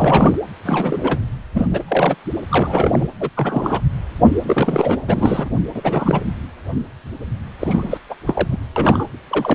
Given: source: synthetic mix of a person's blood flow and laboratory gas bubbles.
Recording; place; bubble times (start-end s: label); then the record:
Doppler ultrasound of blood flow; precordium
0.00-0.38 s: bubbles
0.65-1.20 s: bubbles
1.54-1.69 s: bubbles
1.71-1.82 s: bubbles
1.88-2.15 s: bubbles
2.49-3.08 s: bubbles
3.20-3.29 s: bubbles
3.36-3.81 s: bubbles
4.46-4.97 s: bubbles
5.07-5.50 s: bubbles
5.75-6.21 s: bubbles
7.60-7.97 s: bubbles
8.09-8.15 s: bubbles
8.27-8.47 s: bubbles
8.50-8.58 s: bubbles
8.76-9.07 s: bubbles
9.28-9.55 s: bubbles
From the record:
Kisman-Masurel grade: 333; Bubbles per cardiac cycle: rolling drumbeat, 9 or more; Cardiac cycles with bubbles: 50 to 99%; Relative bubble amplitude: loud (0.450 to 0.775); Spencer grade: 3 (all of the cardiac periods contain showers or single bubble signals, but not dominating or overriding the cardiac motion signals); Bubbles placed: anywhere in the cardiac cycle